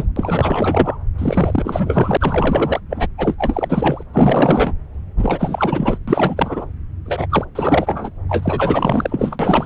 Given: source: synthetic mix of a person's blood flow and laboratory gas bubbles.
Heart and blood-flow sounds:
Doppler ultrasound of blood flow; subclavian vein
0.00-0.12 s: bubbles
0.16-0.97 s: bubbles
1.18-2.17 s: bubbles
2.19-2.80 s: bubbles
2.90-3.07 s: bubbles
3.17-4.03 s: bubbles
4.13-4.74 s: bubbles
5.22-5.98 s: bubbles
6.08-6.66 s: bubbles
7.06-7.27 s: bubbles
7.29-7.45 s: bubbles
7.55-8.10 s: bubbles
8.29-9.37 s: bubbles
9.39-9.66 s: bubbles
From the record:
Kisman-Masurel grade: 444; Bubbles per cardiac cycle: continuous sound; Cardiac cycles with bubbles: 100%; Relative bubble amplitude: maximal (0.775 to 0.999); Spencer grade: 4 (maximum detectable bubble signal sounding continuously throughout systole and diastole of every cardiac period, and overriding the amplitude of the normal cardiac signals); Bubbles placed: anywhere in the cardiac cycle

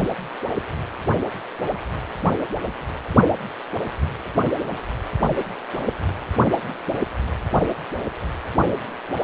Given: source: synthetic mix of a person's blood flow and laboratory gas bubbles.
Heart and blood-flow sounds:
Doppler ultrasound of blood flow; precordium
no bubbles
From the record:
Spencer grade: 0 (complete lack of bubble signals)

